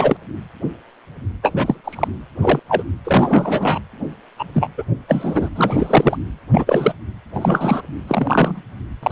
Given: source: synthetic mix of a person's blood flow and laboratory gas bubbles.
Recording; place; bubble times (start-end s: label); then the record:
Doppler ultrasound of blood flow; precordium
0.00-0.17 s: bubbles
1.42-1.80 s: bubbles
1.84-2.08 s: bubbles
2.41-2.59 s: bubbles
2.68-2.83 s: bubbles
3.04-3.79 s: bubbles
4.39-4.44 s: bubbles
4.53-4.69 s: bubbles
4.78-4.83 s: bubbles
5.08-5.49 s: bubbles
5.55-6.17 s: bubbles
6.50-6.93 s: bubbles
7.33-7.82 s: bubbles
8.07-8.62 s: bubbles
9.02-9.12 s: bubbles
From the record:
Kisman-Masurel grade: 233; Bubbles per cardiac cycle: several, 3 to 8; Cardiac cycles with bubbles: 50 to 99%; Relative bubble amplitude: loud (0.450 to 0.775); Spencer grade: 3 (all of the cardiac periods contain showers or single bubble signals, but not dominating or overriding the cardiac motion signals); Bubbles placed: anywhere in the cardiac cycle